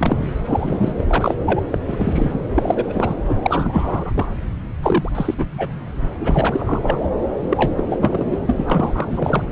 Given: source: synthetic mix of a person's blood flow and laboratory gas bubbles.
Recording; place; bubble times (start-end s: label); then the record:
Doppler ultrasound of blood flow; subclavian vein
0.00-0.29 s: bubbles
0.45-1.34 s: bubbles
1.46-1.61 s: bubbles
1.72-1.78 s: bubbles
1.88-2.38 s: bubbles
2.54-3.15 s: bubbles
3.28-3.36 s: bubbles
3.42-4.26 s: bubbles
4.82-5.09 s: bubbles
5.14-5.34 s: bubbles
5.38-5.46 s: bubbles
5.58-5.68 s: bubbles
6.19-6.98 s: bubbles
7.49-7.74 s: bubbles
7.77-7.83 s: bubbles
7.88-8.42 s: bubbles
8.46-8.53 s: bubbles
8.57-9.43 s: bubbles
From the record:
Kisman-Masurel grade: 342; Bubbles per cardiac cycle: rolling drumbeat, 9 or more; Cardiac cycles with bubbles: 100%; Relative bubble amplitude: moderate (0.250 to 0.450); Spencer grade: 3 (all of the cardiac periods contain showers or single bubble signals, but not dominating or overriding the cardiac motion signals); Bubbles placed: anywhere in the cardiac cycle